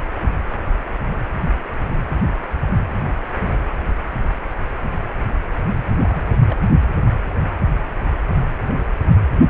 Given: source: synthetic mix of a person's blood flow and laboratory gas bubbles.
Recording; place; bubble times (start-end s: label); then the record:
Doppler ultrasound of blood flow; precordium
5.94-6.40 s: bubbles
6.49-6.56 s: bubbles
From the record:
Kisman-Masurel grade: 111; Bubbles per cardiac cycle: 1 to 2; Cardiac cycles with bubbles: 1 to 10%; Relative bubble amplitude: barely perceptible (0.100 to 0.250); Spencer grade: 1 (occasional bubble signal discernible with the cardiac motion signal, with majority of cardiac periods free of bubbles); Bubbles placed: only in the low amplitude regions of the cardiac cycle